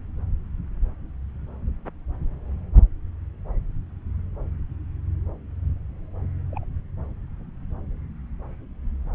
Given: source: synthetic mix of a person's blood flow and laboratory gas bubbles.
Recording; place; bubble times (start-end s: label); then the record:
Doppler ultrasound of blood flow; subclavian vein
6.50-6.64 s: bubbles
From the record:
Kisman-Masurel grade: 111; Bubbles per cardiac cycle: 1 to 2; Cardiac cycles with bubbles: 1 to 10%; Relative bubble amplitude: barely perceptible (0.100 to 0.250); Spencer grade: 1 (occasional bubble signal discernible with the cardiac motion signal, with majority of cardiac periods free of bubbles); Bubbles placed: anywhere in the cardiac cycle